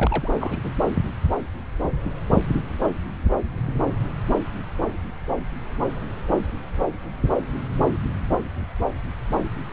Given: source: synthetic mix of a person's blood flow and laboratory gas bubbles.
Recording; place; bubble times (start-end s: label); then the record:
Doppler ultrasound of blood flow; subclavian vein
0.00-0.30 s: bubbles
0.41-0.59 s: bubbles
0.64-0.73 s: bubbles
From the record:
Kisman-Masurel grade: 221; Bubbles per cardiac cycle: several, 3 to 8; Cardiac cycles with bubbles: 10 to 50%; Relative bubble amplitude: barely perceptible (0.100 to 0.250); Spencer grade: 2 (many but less than half of the cardiac periods contain bubble signals, singularly or in groups); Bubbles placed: anywhere in the cardiac cycle